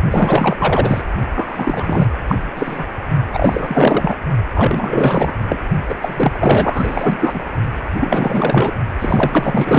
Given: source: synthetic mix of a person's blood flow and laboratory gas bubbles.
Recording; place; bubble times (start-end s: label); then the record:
Doppler ultrasound of blood flow; precordium
0.10-1.03 s: bubbles
1.34-2.06 s: bubbles
2.27-2.35 s: bubbles
2.55-2.85 s: bubbles
3.32-4.16 s: bubbles
4.54-5.34 s: bubbles
5.48-5.58 s: bubbles
5.88-5.95 s: bubbles
6.01-7.43 s: bubbles
7.96-8.71 s: bubbles
8.99-9.79 s: bubbles
From the record:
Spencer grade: 4 (maximum detectable bubble signal sounding continuously throughout systole and diastole of every cardiac period, and overriding the amplitude of the normal cardiac signals); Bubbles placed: only in the low amplitude regions of the cardiac cycle